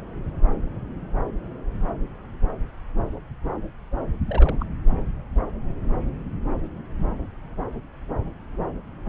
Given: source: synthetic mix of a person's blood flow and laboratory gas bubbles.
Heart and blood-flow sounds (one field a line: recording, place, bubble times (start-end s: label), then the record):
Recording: Doppler ultrasound of blood flow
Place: subclavian vein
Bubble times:
4.29-4.57 s: bubbles
4.59-4.64 s: bubbles
From the record:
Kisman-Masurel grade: 211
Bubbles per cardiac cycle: several, 3 to 8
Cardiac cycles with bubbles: 1 to 10%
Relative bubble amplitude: barely perceptible (0.100 to 0.250)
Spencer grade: 1 (occasional bubble signal discernible with the cardiac motion signal, with majority of cardiac periods free of bubbles)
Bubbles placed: anywhere in the cardiac cycle